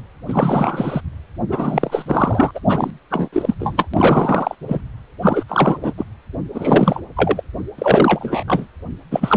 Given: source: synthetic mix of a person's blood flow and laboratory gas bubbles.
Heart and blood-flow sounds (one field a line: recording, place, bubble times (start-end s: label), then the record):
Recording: Doppler ultrasound of blood flow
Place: precordium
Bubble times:
0.28-1.01 s: bubbles
1.49-2.51 s: bubbles
2.54-2.60 s: bubbles
2.68-2.91 s: bubbles
3.10-3.28 s: bubbles
3.33-3.54 s: bubbles
3.59-3.88 s: bubbles
3.94-4.55 s: bubbles
4.68-4.81 s: bubbles
5.21-5.43 s: bubbles
5.48-5.77 s: bubbles
5.81-5.92 s: bubbles
5.97-6.05 s: bubbles
6.54-7.00 s: bubbles
7.16-7.42 s: bubbles
7.78-8.44 s: bubbles
8.47-8.67 s: bubbles
9.11-9.37 s: bubbles
From the record:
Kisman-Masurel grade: 343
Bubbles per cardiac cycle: rolling drumbeat, 9 or more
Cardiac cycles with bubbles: 100%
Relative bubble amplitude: loud (0.450 to 0.775)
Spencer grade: 3 (all of the cardiac periods contain showers or single bubble signals, but not dominating or overriding the cardiac motion signals)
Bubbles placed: anywhere in the cardiac cycle